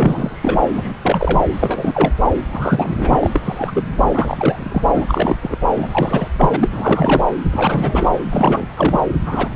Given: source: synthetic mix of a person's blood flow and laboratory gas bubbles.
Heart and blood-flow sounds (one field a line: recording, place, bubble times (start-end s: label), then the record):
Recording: Doppler ultrasound of blood flow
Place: subclavian vein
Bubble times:
0.00-0.93 s: bubbles
1.01-1.44 s: bubbles
1.52-2.12 s: bubbles
2.52-3.40 s: bubbles
3.43-3.83 s: bubbles
4.08-4.83 s: bubbles
4.94-5.05 s: bubbles
5.08-5.38 s: bubbles
5.42-5.57 s: bubbles
5.77-6.28 s: bubbles
6.36-6.57 s: bubbles
6.60-7.23 s: bubbles
7.51-8.20 s: bubbles
8.30-8.67 s: bubbles
8.76-9.00 s: bubbles
9.26-9.48 s: bubbles
From the record:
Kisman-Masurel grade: 343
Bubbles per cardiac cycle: rolling drumbeat, 9 or more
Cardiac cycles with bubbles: 100%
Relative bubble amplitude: loud (0.450 to 0.775)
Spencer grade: 3 (all of the cardiac periods contain showers or single bubble signals, but not dominating or overriding the cardiac motion signals)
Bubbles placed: anywhere in the cardiac cycle